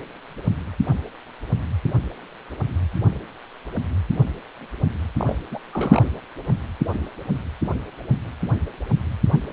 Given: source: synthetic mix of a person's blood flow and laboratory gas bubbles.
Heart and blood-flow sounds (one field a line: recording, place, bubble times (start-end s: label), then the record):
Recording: Doppler ultrasound of blood flow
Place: precordium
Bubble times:
5.19-5.39 s: bubbles
5.51-5.59 s: bubbles
5.72-6.08 s: bubbles
From the record:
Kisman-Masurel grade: 212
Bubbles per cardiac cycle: several, 3 to 8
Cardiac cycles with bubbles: 1 to 10%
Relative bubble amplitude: moderate (0.250 to 0.450)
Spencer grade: 1 (occasional bubble signal discernible with the cardiac motion signal, with majority of cardiac periods free of bubbles)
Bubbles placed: anywhere in the cardiac cycle